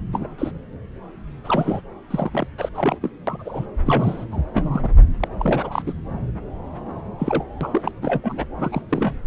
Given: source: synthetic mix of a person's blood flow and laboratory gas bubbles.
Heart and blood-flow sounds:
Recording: Doppler ultrasound of blood flow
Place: subclavian vein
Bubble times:
0.12-0.27 s: bubbles
0.38-0.52 s: bubbles
1.44-1.81 s: bubbles
2.10-2.47 s: bubbles
2.58-2.69 s: bubbles
2.75-2.98 s: bubbles
3.02-3.10 s: bubbles
3.27-3.66 s: bubbles
3.86-4.25 s: bubbles
4.31-4.44 s: bubbles
4.54-4.89 s: bubbles
5.20-5.28 s: bubbles
5.38-5.82 s: bubbles
5.86-5.93 s: bubbles
7.19-7.45 s: bubbles
7.61-7.82 s: bubbles
7.85-7.92 s: bubbles
8.02-8.45 s: bubbles
8.59-8.82 s: bubbles
8.89-9.14 s: bubbles
From the record:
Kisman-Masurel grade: 232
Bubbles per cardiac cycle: several, 3 to 8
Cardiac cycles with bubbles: 50 to 99%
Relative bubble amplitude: moderate (0.250 to 0.450)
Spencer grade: 3 (all of the cardiac periods contain showers or single bubble signals, but not dominating or overriding the cardiac motion signals)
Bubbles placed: anywhere in the cardiac cycle

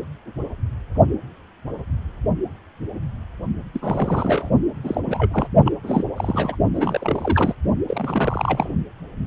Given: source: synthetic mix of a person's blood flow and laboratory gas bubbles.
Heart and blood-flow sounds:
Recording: Doppler ultrasound of blood flow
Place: precordium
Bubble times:
3.73-4.50 s: bubbles
4.83-5.01 s: bubbles
5.05-5.47 s: bubbles
5.64-5.72 s: bubbles
5.83-6.04 s: bubbles
6.17-6.55 s: bubbles
6.73-7.54 s: bubbles
7.88-8.72 s: bubbles
From the record:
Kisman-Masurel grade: 332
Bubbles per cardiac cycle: rolling drumbeat, 9 or more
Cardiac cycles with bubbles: 50 to 99%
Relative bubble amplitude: moderate (0.250 to 0.450)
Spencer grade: 3 (all of the cardiac periods contain showers or single bubble signals, but not dominating or overriding the cardiac motion signals)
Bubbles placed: only in the low amplitude regions of the cardiac cycle

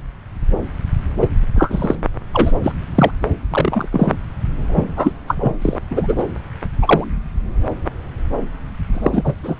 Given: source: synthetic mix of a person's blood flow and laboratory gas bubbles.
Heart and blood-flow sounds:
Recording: Doppler ultrasound of blood flow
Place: subclavian vein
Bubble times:
1.21-1.28 s: bubbles
1.55-1.96 s: bubbles
2.33-2.52 s: bubbles
2.63-2.72 s: bubbles
2.95-3.11 s: bubbles
3.50-3.89 s: bubbles
3.92-4.16 s: bubbles
4.69-4.87 s: bubbles
4.96-5.12 s: bubbles
5.27-5.53 s: bubbles
5.61-5.79 s: bubbles
5.90-6.15 s: bubbles
6.18-6.23 s: bubbles
6.82-7.04 s: bubbles
8.93-9.34 s: bubbles
9.43-9.56 s: bubbles
From the record:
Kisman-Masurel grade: 233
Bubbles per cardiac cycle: several, 3 to 8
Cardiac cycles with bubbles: 50 to 99%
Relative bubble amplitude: loud (0.450 to 0.775)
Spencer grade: 3 (all of the cardiac periods contain showers or single bubble signals, but not dominating or overriding the cardiac motion signals)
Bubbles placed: anywhere in the cardiac cycle

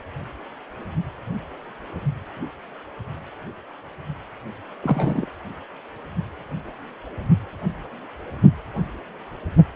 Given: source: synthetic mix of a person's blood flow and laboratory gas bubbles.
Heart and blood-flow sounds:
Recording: Doppler ultrasound of blood flow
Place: precordium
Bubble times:
4.83-5.26 s: bubbles
From the record:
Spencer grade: 1 (occasional bubble signal discernible with the cardiac motion signal, with majority of cardiac periods free of bubbles)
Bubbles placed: anywhere in the cardiac cycle

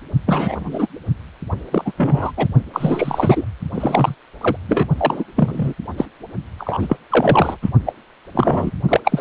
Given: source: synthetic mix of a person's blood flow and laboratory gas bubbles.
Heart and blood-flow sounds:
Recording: Doppler ultrasound of blood flow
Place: precordium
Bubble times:
0.26-0.87 s: bubbles
1.72-1.93 s: bubbles
1.97-2.31 s: bubbles
2.36-2.48 s: bubbles
2.73-3.46 s: bubbles
3.74-4.14 s: bubbles
4.41-4.56 s: bubbles
4.68-4.86 s: bubbles
4.97-5.23 s: bubbles
5.35-5.73 s: bubbles
5.97-6.05 s: bubbles
6.58-6.96 s: bubbles
7.09-7.57 s: bubbles
7.62-7.70 s: bubbles
7.86-7.93 s: bubbles
8.34-8.71 s: bubbles
8.88-9.00 s: bubbles
9.04-9.21 s: bubbles
From the record:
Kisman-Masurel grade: 243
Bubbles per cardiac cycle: several, 3 to 8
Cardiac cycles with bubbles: 100%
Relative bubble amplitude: loud (0.450 to 0.775)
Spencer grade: 3 (all of the cardiac periods contain showers or single bubble signals, but not dominating or overriding the cardiac motion signals)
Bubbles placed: only in the low amplitude regions of the cardiac cycle

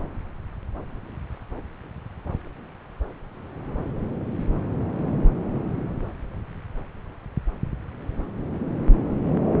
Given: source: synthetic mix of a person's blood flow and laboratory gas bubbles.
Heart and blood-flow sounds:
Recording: Doppler ultrasound of blood flow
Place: subclavian vein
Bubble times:
no bubbles
From the record:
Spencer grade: 0 (complete lack of bubble signals)

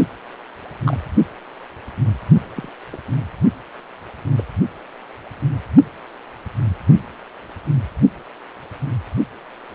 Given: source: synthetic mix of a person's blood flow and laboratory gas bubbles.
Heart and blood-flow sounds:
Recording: Doppler ultrasound of blood flow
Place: precordium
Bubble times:
0.83-0.97 s: bubbles
2.56-2.69 s: bubbles
2.92-2.97 s: bubbles
4.38-4.43 s: bubbles
From the record:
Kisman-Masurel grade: 121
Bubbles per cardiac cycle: 1 to 2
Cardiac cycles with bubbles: 10 to 50%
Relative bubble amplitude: barely perceptible (0.100 to 0.250)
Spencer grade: 2 (many but less than half of the cardiac periods contain bubble signals, singularly or in groups)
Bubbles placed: only in the low amplitude regions of the cardiac cycle

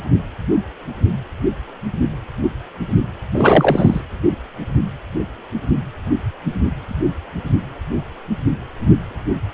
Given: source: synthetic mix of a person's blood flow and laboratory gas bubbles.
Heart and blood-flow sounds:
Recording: Doppler ultrasound of blood flow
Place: precordium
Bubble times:
3.33-4.01 s: bubbles
From the record:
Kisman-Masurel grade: 223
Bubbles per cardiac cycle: several, 3 to 8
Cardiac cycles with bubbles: 10 to 50%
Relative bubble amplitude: loud (0.450 to 0.775)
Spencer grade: 2 (many but less than half of the cardiac periods contain bubble signals, singularly or in groups)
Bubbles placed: anywhere in the cardiac cycle

